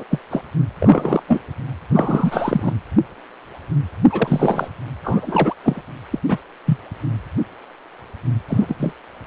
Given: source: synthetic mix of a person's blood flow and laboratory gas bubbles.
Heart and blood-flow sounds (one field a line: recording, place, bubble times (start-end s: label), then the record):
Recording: Doppler ultrasound of blood flow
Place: precordium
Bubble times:
0.00-0.03 s: bubbles
0.10-0.19 s: bubbles
0.30-0.42 s: bubbles
0.80-1.23 s: bubbles
1.27-1.40 s: bubbles
1.90-2.73 s: bubbles
4.10-4.68 s: bubbles
5.04-5.55 s: bubbles
5.63-5.81 s: bubbles
6.12-6.19 s: bubbles
6.28-6.38 s: bubbles
6.66-6.78 s: bubbles
8.48-8.76 s: bubbles
8.79-8.94 s: bubbles
From the record:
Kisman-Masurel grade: 233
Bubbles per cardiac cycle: several, 3 to 8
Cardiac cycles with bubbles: 50 to 99%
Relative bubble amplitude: loud (0.450 to 0.775)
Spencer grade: 3 (all of the cardiac periods contain showers or single bubble signals, but not dominating or overriding the cardiac motion signals)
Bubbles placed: anywhere in the cardiac cycle